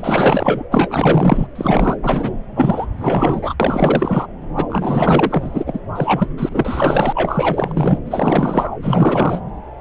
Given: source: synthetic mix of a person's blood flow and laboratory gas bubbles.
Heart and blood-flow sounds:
Doppler ultrasound of blood flow; subclavian vein
0.00-0.64 s: bubbles
0.71-1.47 s: bubbles
1.55-1.97 s: bubbles
2.02-2.31 s: bubbles
2.56-2.86 s: bubbles
2.98-3.55 s: bubbles
3.60-4.27 s: bubbles
4.56-4.67 s: bubbles
4.70-5.79 s: bubbles
5.95-6.31 s: bubbles
6.37-8.00 s: bubbles
8.06-8.68 s: bubbles
8.82-9.40 s: bubbles
From the record:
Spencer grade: 4 (maximum detectable bubble signal sounding continuously throughout systole and diastole of every cardiac period, and overriding the amplitude of the normal cardiac signals); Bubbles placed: anywhere in the cardiac cycle

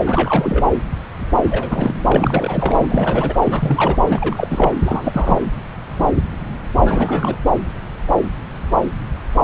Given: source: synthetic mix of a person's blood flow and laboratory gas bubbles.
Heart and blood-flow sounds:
Doppler ultrasound of blood flow; subclavian vein
0.05-0.65 s: bubbles
1.41-1.95 s: bubbles
2.09-3.38 s: bubbles
3.44-4.02 s: bubbles
4.09-4.73 s: bubbles
4.80-5.38 s: bubbles
6.79-7.35 s: bubbles
From the record:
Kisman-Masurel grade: 332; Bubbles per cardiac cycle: rolling drumbeat, 9 or more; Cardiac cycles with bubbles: 50 to 99%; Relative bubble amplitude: moderate (0.250 to 0.450); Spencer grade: 3 (all of the cardiac periods contain showers or single bubble signals, but not dominating or overriding the cardiac motion signals); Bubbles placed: anywhere in the cardiac cycle

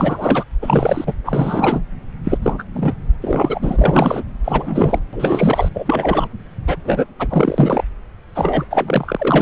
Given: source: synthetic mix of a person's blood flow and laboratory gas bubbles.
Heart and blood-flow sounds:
Doppler ultrasound of blood flow; subclavian vein
0.00-0.44 s: bubbles
0.61-1.14 s: bubbles
1.26-1.80 s: bubbles
2.24-2.38 s: bubbles
2.42-2.64 s: bubbles
2.73-2.93 s: bubbles
3.21-4.23 s: bubbles
4.44-5.00 s: bubbles
5.12-5.68 s: bubbles
5.74-6.28 s: bubbles
6.67-6.76 s: bubbles
6.84-7.05 s: bubbles
7.18-7.84 s: bubbles
8.35-8.64 s: bubbles
8.70-9.42 s: bubbles
From the record:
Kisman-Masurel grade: 343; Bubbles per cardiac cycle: rolling drumbeat, 9 or more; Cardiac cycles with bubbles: 100%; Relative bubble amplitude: loud (0.450 to 0.775); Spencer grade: 3 (all of the cardiac periods contain showers or single bubble signals, but not dominating or overriding the cardiac motion signals); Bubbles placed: anywhere in the cardiac cycle

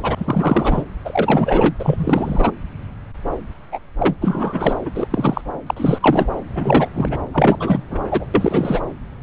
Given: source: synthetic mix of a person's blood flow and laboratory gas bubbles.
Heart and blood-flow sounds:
Doppler ultrasound of blood flow; subclavian vein
0.00-0.82 s: bubbles
1.05-1.74 s: bubbles
1.79-2.51 s: bubbles
3.71-3.79 s: bubbles
3.98-4.16 s: bubbles
4.21-4.73 s: bubbles
4.85-4.91 s: bubbles
4.94-5.08 s: bubbles
5.10-5.41 s: bubbles
5.67-6.28 s: bubbles
6.54-6.88 s: bubbles
6.94-7.18 s: bubbles
7.33-7.83 s: bubbles
7.91-8.25 s: bubbles
8.34-8.82 s: bubbles
From the record:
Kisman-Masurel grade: 333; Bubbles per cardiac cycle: rolling drumbeat, 9 or more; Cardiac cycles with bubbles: 50 to 99%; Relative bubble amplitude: loud (0.450 to 0.775); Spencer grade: 3 (all of the cardiac periods contain showers or single bubble signals, but not dominating or overriding the cardiac motion signals); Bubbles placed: anywhere in the cardiac cycle

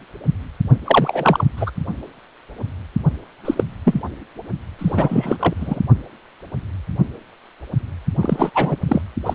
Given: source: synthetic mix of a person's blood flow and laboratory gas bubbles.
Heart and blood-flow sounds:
Doppler ultrasound of blood flow; precordium
0.84-1.45 s: bubbles
1.56-1.71 s: bubbles
3.44-3.64 s: bubbles
3.84-4.00 s: bubbles
4.79-5.53 s: bubbles
5.56-5.80 s: bubbles
8.21-8.50 s: bubbles
8.54-8.77 s: bubbles
8.88-9.02 s: bubbles
9.26-9.34 s: bubbles
From the record:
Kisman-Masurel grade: 233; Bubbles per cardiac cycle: several, 3 to 8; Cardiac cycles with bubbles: 50 to 99%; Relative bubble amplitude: loud (0.450 to 0.775); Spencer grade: 3 (all of the cardiac periods contain showers or single bubble signals, but not dominating or overriding the cardiac motion signals); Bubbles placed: only in the low amplitude regions of the cardiac cycle

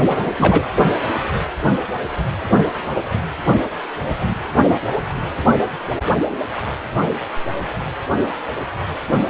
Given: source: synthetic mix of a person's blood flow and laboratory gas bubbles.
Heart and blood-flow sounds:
Doppler ultrasound of blood flow; precordium
0.08-0.65 s: bubbles
From the record:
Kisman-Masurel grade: 213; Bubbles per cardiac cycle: several, 3 to 8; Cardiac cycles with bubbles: 1 to 10%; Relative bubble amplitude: loud (0.450 to 0.775); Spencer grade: 1 (occasional bubble signal discernible with the cardiac motion signal, with majority of cardiac periods free of bubbles); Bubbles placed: anywhere in the cardiac cycle

